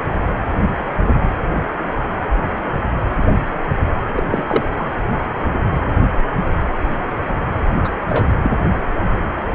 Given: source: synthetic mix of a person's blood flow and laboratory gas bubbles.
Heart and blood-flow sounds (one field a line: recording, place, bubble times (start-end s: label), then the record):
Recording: Doppler ultrasound of blood flow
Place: precordium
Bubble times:
4.15-4.23 s: bubbles
4.29-4.64 s: bubbles
4.79-4.86 s: bubbles
7.84-7.96 s: bubbles
8.01-8.33 s: bubbles
8.43-8.52 s: bubbles
From the record:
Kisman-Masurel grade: 222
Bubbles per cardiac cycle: several, 3 to 8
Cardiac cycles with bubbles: 10 to 50%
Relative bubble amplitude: moderate (0.250 to 0.450)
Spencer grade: 2 (many but less than half of the cardiac periods contain bubble signals, singularly or in groups)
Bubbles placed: anywhere in the cardiac cycle